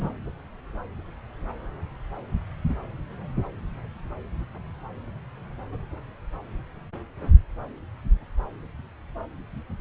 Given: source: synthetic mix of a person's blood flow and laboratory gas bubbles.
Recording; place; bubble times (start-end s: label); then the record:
Doppler ultrasound of blood flow; subclavian vein
0.01-0.10 s: bubbles
From the record:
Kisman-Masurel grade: 211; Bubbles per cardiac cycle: several, 3 to 8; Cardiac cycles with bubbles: 1 to 10%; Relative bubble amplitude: barely perceptible (0.100 to 0.250); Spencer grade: 1 (occasional bubble signal discernible with the cardiac motion signal, with majority of cardiac periods free of bubbles); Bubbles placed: anywhere in the cardiac cycle